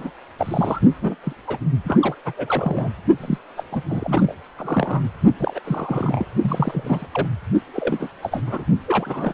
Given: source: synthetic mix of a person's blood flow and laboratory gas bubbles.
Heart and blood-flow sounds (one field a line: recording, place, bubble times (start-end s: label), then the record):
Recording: Doppler ultrasound of blood flow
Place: precordium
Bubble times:
0.00-0.10 s: bubbles
0.39-0.81 s: bubbles
1.01-1.15 s: bubbles
1.23-1.33 s: bubbles
1.47-1.58 s: bubbles
1.84-2.15 s: bubbles
2.25-2.32 s: bubbles
2.36-2.90 s: bubbles
3.20-3.38 s: bubbles
3.57-3.64 s: bubbles
3.72-3.82 s: bubbles
3.89-4.34 s: bubbles
4.58-5.02 s: bubbles
5.40-5.60 s: bubbles
5.65-6.25 s: bubbles
6.41-7.07 s: bubbles
7.14-7.27 s: bubbles
7.73-8.10 s: bubbles
8.22-8.43 s: bubbles
8.46-8.63 s: bubbles
8.87-9.34 s: bubbles
From the record:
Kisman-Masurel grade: 332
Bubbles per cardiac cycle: rolling drumbeat, 9 or more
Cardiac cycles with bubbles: 50 to 99%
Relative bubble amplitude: moderate (0.250 to 0.450)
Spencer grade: 3 (all of the cardiac periods contain showers or single bubble signals, but not dominating or overriding the cardiac motion signals)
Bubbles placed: only in the low amplitude regions of the cardiac cycle